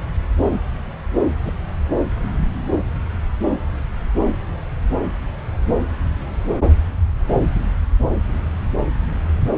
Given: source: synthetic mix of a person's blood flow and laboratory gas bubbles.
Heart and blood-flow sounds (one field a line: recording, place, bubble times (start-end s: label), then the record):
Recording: Doppler ultrasound of blood flow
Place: subclavian vein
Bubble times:
1.42-1.54 s: bubbles
From the record:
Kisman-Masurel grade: 111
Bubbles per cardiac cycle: 1 to 2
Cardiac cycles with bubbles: 1 to 10%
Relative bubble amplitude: barely perceptible (0.100 to 0.250)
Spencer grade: 1 (occasional bubble signal discernible with the cardiac motion signal, with majority of cardiac periods free of bubbles)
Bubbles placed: anywhere in the cardiac cycle